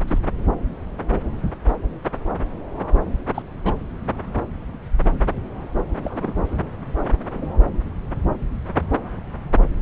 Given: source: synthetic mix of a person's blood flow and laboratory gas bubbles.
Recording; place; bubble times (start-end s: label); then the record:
Doppler ultrasound of blood flow; subclavian vein
0.07-0.18 s: bubbles
3.34-3.42 s: bubbles
3.63-3.75 s: bubbles
6.03-6.33 s: bubbles
7.35-7.44 s: bubbles
From the record:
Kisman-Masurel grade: 121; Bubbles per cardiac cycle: 1 to 2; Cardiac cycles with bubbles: 10 to 50%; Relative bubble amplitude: barely perceptible (0.100 to 0.250); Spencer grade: 2 (many but less than half of the cardiac periods contain bubble signals, singularly or in groups); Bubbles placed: anywhere in the cardiac cycle